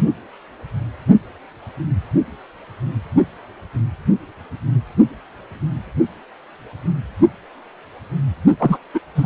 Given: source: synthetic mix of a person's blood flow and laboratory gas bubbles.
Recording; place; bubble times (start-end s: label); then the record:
Doppler ultrasound of blood flow; precordium
8.59-8.78 s: bubbles
8.94-9.01 s: bubbles
9.15-9.26 s: bubbles
From the record:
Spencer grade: 1 (occasional bubble signal discernible with the cardiac motion signal, with majority of cardiac periods free of bubbles); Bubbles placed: only in the low amplitude regions of the cardiac cycle